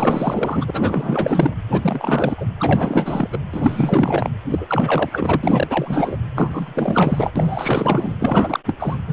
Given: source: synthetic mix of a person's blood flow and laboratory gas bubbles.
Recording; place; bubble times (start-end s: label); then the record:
Doppler ultrasound of blood flow; precordium
0.00-1.55 s: bubbles
1.68-2.46 s: bubbles
2.58-3.29 s: bubbles
3.32-3.39 s: bubbles
3.53-4.29 s: bubbles
4.50-6.17 s: bubbles
6.35-7.31 s: bubbles
7.35-8.14 s: bubbles
8.19-8.60 s: bubbles
8.66-8.76 s: bubbles
8.79-8.97 s: bubbles
9.07-9.13 s: bubbles
From the record:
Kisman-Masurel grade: 444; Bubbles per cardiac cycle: continuous sound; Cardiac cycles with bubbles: 100%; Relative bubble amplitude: maximal (0.775 to 0.999); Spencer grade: 4 (maximum detectable bubble signal sounding continuously throughout systole and diastole of every cardiac period, and overriding the amplitude of the normal cardiac signals); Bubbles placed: anywhere in the cardiac cycle